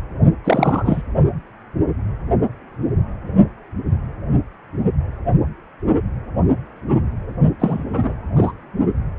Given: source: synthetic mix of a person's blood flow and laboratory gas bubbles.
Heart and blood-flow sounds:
Doppler ultrasound of blood flow; precordium
0.44-1.02 s: bubbles
7.59-7.85 s: bubbles
7.93-8.13 s: bubbles
8.36-8.52 s: bubbles
From the record:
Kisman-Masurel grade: 223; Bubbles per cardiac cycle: several, 3 to 8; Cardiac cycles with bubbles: 10 to 50%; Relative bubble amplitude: loud (0.450 to 0.775); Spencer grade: 2 (many but less than half of the cardiac periods contain bubble signals, singularly or in groups); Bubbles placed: only in the low amplitude regions of the cardiac cycle

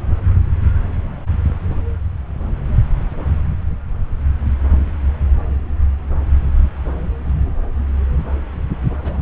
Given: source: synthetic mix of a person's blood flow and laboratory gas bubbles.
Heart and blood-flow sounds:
Doppler ultrasound of blood flow; subclavian vein
9.03-9.20 s: bubbles
From the record:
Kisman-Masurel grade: 111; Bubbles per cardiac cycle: 1 to 2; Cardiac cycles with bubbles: 1 to 10%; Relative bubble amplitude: barely perceptible (0.100 to 0.250); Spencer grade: 1 (occasional bubble signal discernible with the cardiac motion signal, with majority of cardiac periods free of bubbles); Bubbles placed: anywhere in the cardiac cycle

